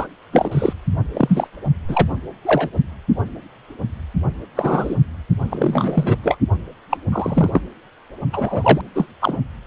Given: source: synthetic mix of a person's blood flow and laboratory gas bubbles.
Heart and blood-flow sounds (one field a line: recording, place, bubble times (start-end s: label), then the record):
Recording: Doppler ultrasound of blood flow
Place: precordium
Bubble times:
0.00-0.06 s: bubbles
0.32-0.73 s: bubbles
1.13-1.48 s: bubbles
1.88-2.08 s: bubbles
2.45-2.69 s: bubbles
4.55-4.96 s: bubbles
5.50-6.18 s: bubbles
6.23-6.37 s: bubbles
6.90-6.97 s: bubbles
7.12-7.61 s: bubbles
8.32-8.81 s: bubbles
8.95-9.07 s: bubbles
9.20-9.38 s: bubbles
From the record:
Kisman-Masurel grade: 233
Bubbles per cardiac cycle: several, 3 to 8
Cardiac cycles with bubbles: 50 to 99%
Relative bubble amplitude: loud (0.450 to 0.775)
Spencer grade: 3 (all of the cardiac periods contain showers or single bubble signals, but not dominating or overriding the cardiac motion signals)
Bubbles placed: only in the low amplitude regions of the cardiac cycle